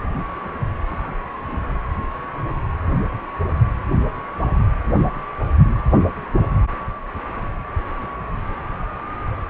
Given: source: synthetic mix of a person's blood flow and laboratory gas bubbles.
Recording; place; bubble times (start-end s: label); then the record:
Doppler ultrasound of blood flow; precordium
no bubbles
From the record:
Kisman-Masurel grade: 000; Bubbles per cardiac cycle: 0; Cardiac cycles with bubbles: 0%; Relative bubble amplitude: no bubbles discernible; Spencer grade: 0 (complete lack of bubble signals)